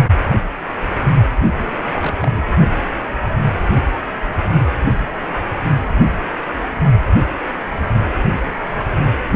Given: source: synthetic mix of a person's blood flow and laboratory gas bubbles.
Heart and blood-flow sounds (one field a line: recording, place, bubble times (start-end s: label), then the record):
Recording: Doppler ultrasound of blood flow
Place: precordium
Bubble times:
1.50-1.72 s: bubbles
1.86-2.15 s: bubbles
2.23-2.31 s: bubbles
2.35-2.45 s: bubbles
From the record:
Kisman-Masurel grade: 211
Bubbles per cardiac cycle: several, 3 to 8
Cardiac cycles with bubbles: 1 to 10%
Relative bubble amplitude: barely perceptible (0.100 to 0.250)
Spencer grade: 1 (occasional bubble signal discernible with the cardiac motion signal, with majority of cardiac periods free of bubbles)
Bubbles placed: only in the low amplitude regions of the cardiac cycle